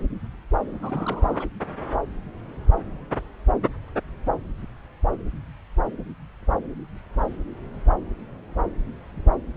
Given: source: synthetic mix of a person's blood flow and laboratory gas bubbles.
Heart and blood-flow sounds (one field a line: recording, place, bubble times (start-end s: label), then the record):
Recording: Doppler ultrasound of blood flow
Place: subclavian vein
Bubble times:
0.83-1.48 s: bubbles
From the record:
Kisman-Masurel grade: 211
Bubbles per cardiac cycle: several, 3 to 8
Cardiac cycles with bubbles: 1 to 10%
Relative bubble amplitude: barely perceptible (0.100 to 0.250)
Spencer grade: 1 (occasional bubble signal discernible with the cardiac motion signal, with majority of cardiac periods free of bubbles)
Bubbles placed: anywhere in the cardiac cycle